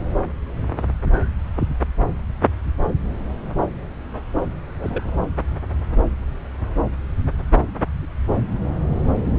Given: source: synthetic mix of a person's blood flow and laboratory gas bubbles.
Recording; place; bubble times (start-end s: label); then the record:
Doppler ultrasound of blood flow; subclavian vein
4.79-5.18 s: bubbles
From the record:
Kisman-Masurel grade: 211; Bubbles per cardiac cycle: several, 3 to 8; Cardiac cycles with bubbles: 1 to 10%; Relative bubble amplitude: barely perceptible (0.100 to 0.250); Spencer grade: 1 (occasional bubble signal discernible with the cardiac motion signal, with majority of cardiac periods free of bubbles); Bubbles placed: anywhere in the cardiac cycle